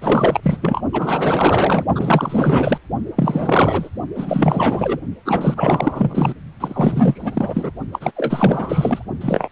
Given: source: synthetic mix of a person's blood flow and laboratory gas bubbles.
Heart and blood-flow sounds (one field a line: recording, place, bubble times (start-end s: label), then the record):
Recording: Doppler ultrasound of blood flow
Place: precordium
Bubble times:
0.01-0.81 s: bubbles
0.93-1.86 s: bubbles
1.95-2.78 s: bubbles
3.16-3.89 s: bubbles
4.15-5.00 s: bubbles
5.25-6.33 s: bubbles
6.60-7.71 s: bubbles
7.92-8.12 s: bubbles
8.16-9.05 s: bubbles
9.21-9.49 s: bubbles
From the record:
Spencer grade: 4 (maximum detectable bubble signal sounding continuously throughout systole and diastole of every cardiac period, and overriding the amplitude of the normal cardiac signals)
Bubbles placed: only in the low amplitude regions of the cardiac cycle